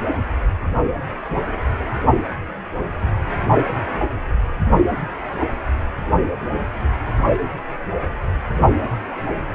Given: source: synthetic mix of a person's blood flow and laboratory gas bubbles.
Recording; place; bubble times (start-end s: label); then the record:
Doppler ultrasound of blood flow; precordium
no bubbles
From the record:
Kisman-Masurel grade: 000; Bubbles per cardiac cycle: 0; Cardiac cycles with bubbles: 0%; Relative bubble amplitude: no bubbles discernible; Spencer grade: 0 (complete lack of bubble signals)